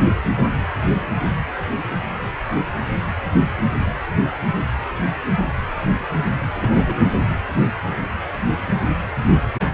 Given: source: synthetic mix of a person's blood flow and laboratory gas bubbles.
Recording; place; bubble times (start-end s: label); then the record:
Doppler ultrasound of blood flow; precordium
6.56-7.04 s: bubbles
From the record:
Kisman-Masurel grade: 112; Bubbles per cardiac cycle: 1 to 2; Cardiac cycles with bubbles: 1 to 10%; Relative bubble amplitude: moderate (0.250 to 0.450); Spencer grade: 1 (occasional bubble signal discernible with the cardiac motion signal, with majority of cardiac periods free of bubbles); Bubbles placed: anywhere in the cardiac cycle